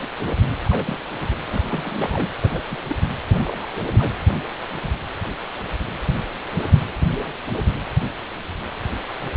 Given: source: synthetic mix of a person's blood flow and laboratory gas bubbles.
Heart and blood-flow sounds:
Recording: Doppler ultrasound of blood flow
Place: precordium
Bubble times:
0.65-0.98 s: bubbles
1.10-1.36 s: bubbles
1.47-2.29 s: bubbles
2.43-2.61 s: bubbles
2.69-2.78 s: bubbles
2.89-2.96 s: bubbles
3.30-3.67 s: bubbles
3.75-4.11 s: bubbles
From the record:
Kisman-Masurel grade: 221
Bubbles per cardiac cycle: several, 3 to 8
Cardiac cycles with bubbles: 10 to 50%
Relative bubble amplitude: barely perceptible (0.100 to 0.250)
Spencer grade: 2 (many but less than half of the cardiac periods contain bubble signals, singularly or in groups)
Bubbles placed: anywhere in the cardiac cycle

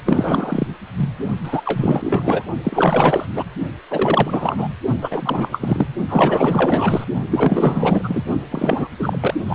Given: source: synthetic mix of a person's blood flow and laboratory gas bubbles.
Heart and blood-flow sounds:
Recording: Doppler ultrasound of blood flow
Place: precordium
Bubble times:
0.06-0.68 s: bubbles
0.96-1.09 s: bubbles
1.43-1.62 s: bubbles
1.65-2.43 s: bubbles
2.63-3.25 s: bubbles
3.35-3.45 s: bubbles
3.90-4.68 s: bubbles
5.01-5.88 s: bubbles
6.08-7.04 s: bubbles
7.30-8.23 s: bubbles
8.51-8.88 s: bubbles
8.99-9.35 s: bubbles
9.45-9.55 s: bubbles
From the record:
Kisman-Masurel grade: 444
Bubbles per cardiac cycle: continuous sound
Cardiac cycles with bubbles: 100%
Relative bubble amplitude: maximal (0.775 to 0.999)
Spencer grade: 4 (maximum detectable bubble signal sounding continuously throughout systole and diastole of every cardiac period, and overriding the amplitude of the normal cardiac signals)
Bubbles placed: only in the low amplitude regions of the cardiac cycle

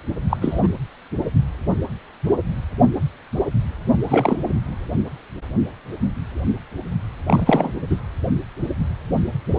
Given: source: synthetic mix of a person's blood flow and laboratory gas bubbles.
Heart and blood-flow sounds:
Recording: Doppler ultrasound of blood flow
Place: precordium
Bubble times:
0.29-0.37 s: bubbles
0.41-0.68 s: bubbles
4.08-4.48 s: bubbles
7.27-7.73 s: bubbles
7.90-7.96 s: bubbles
From the record:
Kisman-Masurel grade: 223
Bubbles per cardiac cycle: several, 3 to 8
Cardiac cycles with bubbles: 10 to 50%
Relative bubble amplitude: loud (0.450 to 0.775)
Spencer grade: 2 (many but less than half of the cardiac periods contain bubble signals, singularly or in groups)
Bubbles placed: anywhere in the cardiac cycle

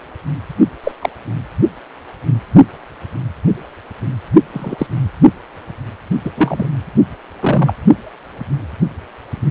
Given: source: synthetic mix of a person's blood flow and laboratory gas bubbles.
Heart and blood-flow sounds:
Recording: Doppler ultrasound of blood flow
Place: precordium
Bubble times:
0.83-0.92 s: bubbles
1.01-1.09 s: bubbles
4.53-4.87 s: bubbles
6.25-6.31 s: bubbles
6.37-6.67 s: bubbles
7.40-7.74 s: bubbles
From the record:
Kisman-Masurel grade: 123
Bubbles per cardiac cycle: 1 to 2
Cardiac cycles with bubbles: 10 to 50%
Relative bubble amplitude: loud (0.450 to 0.775)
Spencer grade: 2 (many but less than half of the cardiac periods contain bubble signals, singularly or in groups)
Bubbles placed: only in the low amplitude regions of the cardiac cycle

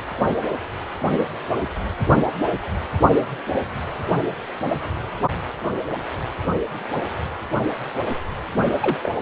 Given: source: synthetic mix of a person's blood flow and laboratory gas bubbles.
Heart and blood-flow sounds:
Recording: Doppler ultrasound of blood flow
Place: precordium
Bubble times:
8.81-8.96 s: bubbles
9.03-9.12 s: bubbles
From the record:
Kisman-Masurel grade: 112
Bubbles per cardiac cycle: 1 to 2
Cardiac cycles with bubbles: 1 to 10%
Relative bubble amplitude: moderate (0.250 to 0.450)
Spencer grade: 1 (occasional bubble signal discernible with the cardiac motion signal, with majority of cardiac periods free of bubbles)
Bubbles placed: only in the low amplitude regions of the cardiac cycle

